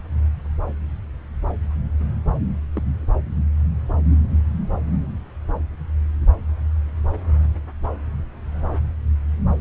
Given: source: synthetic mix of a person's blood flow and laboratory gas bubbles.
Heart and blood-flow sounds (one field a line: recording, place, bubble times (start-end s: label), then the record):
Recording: Doppler ultrasound of blood flow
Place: subclavian vein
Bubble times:
2.75-2.81 s: bubbles
From the record:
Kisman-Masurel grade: 111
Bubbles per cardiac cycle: 1 to 2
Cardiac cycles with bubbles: 1 to 10%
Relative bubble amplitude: barely perceptible (0.100 to 0.250)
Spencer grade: 1 (occasional bubble signal discernible with the cardiac motion signal, with majority of cardiac periods free of bubbles)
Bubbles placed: anywhere in the cardiac cycle